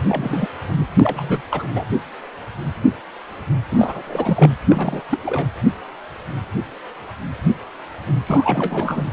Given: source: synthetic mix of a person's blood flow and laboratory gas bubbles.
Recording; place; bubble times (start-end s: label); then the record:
Doppler ultrasound of blood flow; precordium
0.00-0.48 s: bubbles
0.68-0.84 s: bubbles
1.00-1.42 s: bubbles
1.51-1.66 s: bubbles
1.74-1.84 s: bubbles
3.71-4.02 s: bubbles
4.06-4.54 s: bubbles
4.65-5.02 s: bubbles
5.09-5.19 s: bubbles
5.23-5.47 s: bubbles
8.26-9.05 s: bubbles
From the record:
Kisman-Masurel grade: 332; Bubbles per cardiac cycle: rolling drumbeat, 9 or more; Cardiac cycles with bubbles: 50 to 99%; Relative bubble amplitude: moderate (0.250 to 0.450); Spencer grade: 3 (all of the cardiac periods contain showers or single bubble signals, but not dominating or overriding the cardiac motion signals); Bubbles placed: anywhere in the cardiac cycle